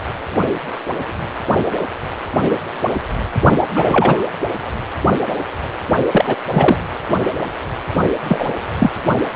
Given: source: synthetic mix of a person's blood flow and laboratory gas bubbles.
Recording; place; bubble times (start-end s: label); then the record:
Doppler ultrasound of blood flow; precordium
3.75-4.32 s: bubbles
6.11-6.36 s: bubbles
6.51-6.78 s: bubbles
8.28-8.48 s: bubbles
8.79-8.90 s: bubbles
From the record:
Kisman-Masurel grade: 223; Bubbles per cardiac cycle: several, 3 to 8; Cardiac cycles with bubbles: 10 to 50%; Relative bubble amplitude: loud (0.450 to 0.775); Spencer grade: 2 (many but less than half of the cardiac periods contain bubble signals, singularly or in groups); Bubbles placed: only in the low amplitude regions of the cardiac cycle